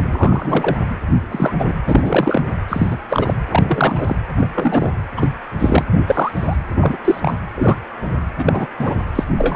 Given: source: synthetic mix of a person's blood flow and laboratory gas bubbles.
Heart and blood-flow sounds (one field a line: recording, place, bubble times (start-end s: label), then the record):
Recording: Doppler ultrasound of blood flow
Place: precordium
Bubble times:
0.11-0.77 s: bubbles
1.31-1.55 s: bubbles
1.58-1.65 s: bubbles
1.68-1.74 s: bubbles
1.86-2.42 s: bubbles
2.68-2.99 s: bubbles
3.09-3.34 s: bubbles
3.49-4.16 s: bubbles
4.38-4.49 s: bubbles
4.54-4.92 s: bubbles
5.17-5.29 s: bubbles
5.58-5.86 s: bubbles
5.90-6.58 s: bubbles
6.79-6.97 s: bubbles
7.04-7.34 s: bubbles
7.56-7.77 s: bubbles
8.38-8.68 s: bubbles
8.79-8.96 s: bubbles
9.15-9.24 s: bubbles
9.38-9.56 s: bubbles
From the record:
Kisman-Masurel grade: 243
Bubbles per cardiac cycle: several, 3 to 8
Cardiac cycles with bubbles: 100%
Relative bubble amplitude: loud (0.450 to 0.775)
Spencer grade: 3 (all of the cardiac periods contain showers or single bubble signals, but not dominating or overriding the cardiac motion signals)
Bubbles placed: anywhere in the cardiac cycle